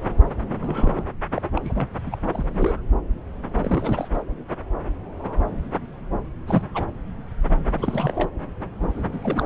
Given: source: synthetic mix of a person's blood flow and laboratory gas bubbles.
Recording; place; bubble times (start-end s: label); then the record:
Doppler ultrasound of blood flow; subclavian vein
0.52-1.04 s: bubbles
1.34-1.42 s: bubbles
1.56-1.61 s: bubbles
1.64-1.88 s: bubbles
2.06-2.17 s: bubbles
2.27-2.81 s: bubbles
3.58-4.08 s: bubbles
6.47-6.67 s: bubbles
6.74-6.84 s: bubbles
7.77-8.30 s: bubbles
9.12-9.46 s: bubbles
From the record:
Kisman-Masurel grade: 221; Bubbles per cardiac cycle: several, 3 to 8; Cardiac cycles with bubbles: 10 to 50%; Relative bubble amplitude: barely perceptible (0.100 to 0.250); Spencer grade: 2 (many but less than half of the cardiac periods contain bubble signals, singularly or in groups); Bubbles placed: anywhere in the cardiac cycle